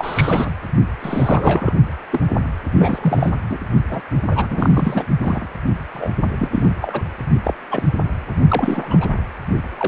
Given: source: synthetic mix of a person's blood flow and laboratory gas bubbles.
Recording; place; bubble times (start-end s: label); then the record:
Doppler ultrasound of blood flow; precordium
0.00-0.52 s: bubbles
0.99-1.72 s: bubbles
2.12-2.21 s: bubbles
2.79-3.32 s: bubbles
3.50-3.57 s: bubbles
3.90-4.01 s: bubbles
4.31-5.06 s: bubbles
5.20-5.48 s: bubbles
5.93-6.11 s: bubbles
6.39-6.74 s: bubbles
6.81-7.02 s: bubbles
7.45-7.54 s: bubbles
7.71-7.83 s: bubbles
8.48-9.08 s: bubbles
9.75-9.88 s: bubbles
From the record:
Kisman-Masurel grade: 243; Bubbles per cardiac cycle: several, 3 to 8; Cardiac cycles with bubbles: 100%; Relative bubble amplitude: loud (0.450 to 0.775); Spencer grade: 3 (all of the cardiac periods contain showers or single bubble signals, but not dominating or overriding the cardiac motion signals); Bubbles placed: only in the low amplitude regions of the cardiac cycle